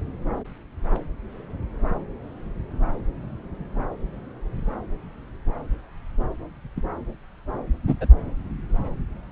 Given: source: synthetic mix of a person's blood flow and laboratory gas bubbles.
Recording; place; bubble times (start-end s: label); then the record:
Doppler ultrasound of blood flow; subclavian vein
6.76-6.81 s: bubbles
7.87-7.95 s: bubbles
8.00-8.05 s: bubbles
From the record:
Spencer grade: 1 (occasional bubble signal discernible with the cardiac motion signal, with majority of cardiac periods free of bubbles); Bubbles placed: anywhere in the cardiac cycle